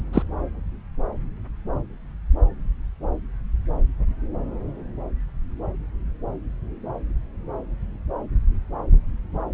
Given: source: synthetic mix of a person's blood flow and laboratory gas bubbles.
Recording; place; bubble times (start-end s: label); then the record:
Doppler ultrasound of blood flow; subclavian vein
0.13-0.23 s: bubbles
From the record:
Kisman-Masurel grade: 122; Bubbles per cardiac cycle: 1 to 2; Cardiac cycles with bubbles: 10 to 50%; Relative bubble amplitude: moderate (0.250 to 0.450); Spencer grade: 2 (many but less than half of the cardiac periods contain bubble signals, singularly or in groups); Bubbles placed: anywhere in the cardiac cycle